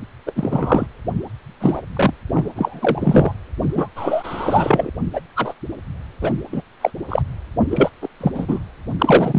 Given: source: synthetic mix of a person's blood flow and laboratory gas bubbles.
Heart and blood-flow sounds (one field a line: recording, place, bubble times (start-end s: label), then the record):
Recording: Doppler ultrasound of blood flow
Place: precordium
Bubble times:
0.26-0.32 s: bubbles
0.35-0.86 s: bubbles
1.60-1.81 s: bubbles
1.96-2.14 s: bubbles
2.31-2.50 s: bubbles
2.56-3.35 s: bubbles
3.64-3.88 s: bubbles
3.96-4.90 s: bubbles
5.13-5.20 s: bubbles
5.36-5.54 s: bubbles
6.21-6.32 s: bubbles
6.51-6.61 s: bubbles
6.81-6.91 s: bubbles
7.08-7.22 s: bubbles
7.71-7.90 s: bubbles
8.02-8.07 s: bubbles
8.20-8.31 s: bubbles
8.34-8.59 s: bubbles
8.99-9.39 s: bubbles
From the record:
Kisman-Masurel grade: 243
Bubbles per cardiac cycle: several, 3 to 8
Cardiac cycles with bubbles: 100%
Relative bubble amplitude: loud (0.450 to 0.775)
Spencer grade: 3 (all of the cardiac periods contain showers or single bubble signals, but not dominating or overriding the cardiac motion signals)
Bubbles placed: anywhere in the cardiac cycle